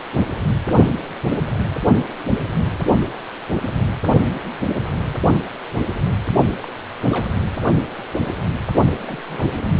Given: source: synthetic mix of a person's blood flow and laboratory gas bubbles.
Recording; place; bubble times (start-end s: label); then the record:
Doppler ultrasound of blood flow; precordium
6.62-6.66 s: bubbles
7.06-7.27 s: bubbles
9.04-9.17 s: bubbles
9.23-9.72 s: bubbles
From the record:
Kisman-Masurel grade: 221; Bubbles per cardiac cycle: several, 3 to 8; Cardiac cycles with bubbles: 10 to 50%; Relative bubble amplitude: barely perceptible (0.100 to 0.250); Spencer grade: 2 (many but less than half of the cardiac periods contain bubble signals, singularly or in groups); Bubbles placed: only in the low amplitude regions of the cardiac cycle